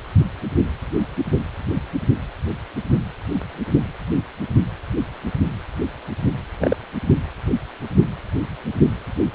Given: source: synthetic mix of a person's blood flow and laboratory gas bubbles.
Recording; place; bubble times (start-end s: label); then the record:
Doppler ultrasound of blood flow; precordium
6.60-6.76 s: bubbles
From the record:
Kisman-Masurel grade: 112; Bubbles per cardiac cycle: 1 to 2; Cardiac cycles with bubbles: 1 to 10%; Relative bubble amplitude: moderate (0.250 to 0.450); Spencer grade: 1 (occasional bubble signal discernible with the cardiac motion signal, with majority of cardiac periods free of bubbles); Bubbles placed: only in the low amplitude regions of the cardiac cycle